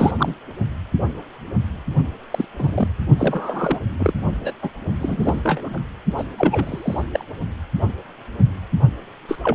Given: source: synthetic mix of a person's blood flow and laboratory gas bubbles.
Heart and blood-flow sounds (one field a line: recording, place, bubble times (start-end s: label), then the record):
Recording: Doppler ultrasound of blood flow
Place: precordium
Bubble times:
0.00-0.12 s: bubbles
0.17-0.34 s: bubbles
2.31-2.45 s: bubbles
2.59-2.88 s: bubbles
3.18-3.79 s: bubbles
4.00-4.13 s: bubbles
4.45-4.51 s: bubbles
4.62-4.70 s: bubbles
5.00-5.41 s: bubbles
5.44-5.79 s: bubbles
6.17-6.24 s: bubbles
6.38-7.02 s: bubbles
7.12-7.25 s: bubbles
9.29-9.37 s: bubbles
9.43-9.55 s: bubbles
From the record:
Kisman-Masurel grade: 232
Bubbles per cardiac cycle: several, 3 to 8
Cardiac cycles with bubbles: 50 to 99%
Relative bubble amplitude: moderate (0.250 to 0.450)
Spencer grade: 3 (all of the cardiac periods contain showers or single bubble signals, but not dominating or overriding the cardiac motion signals)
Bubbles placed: only in the low amplitude regions of the cardiac cycle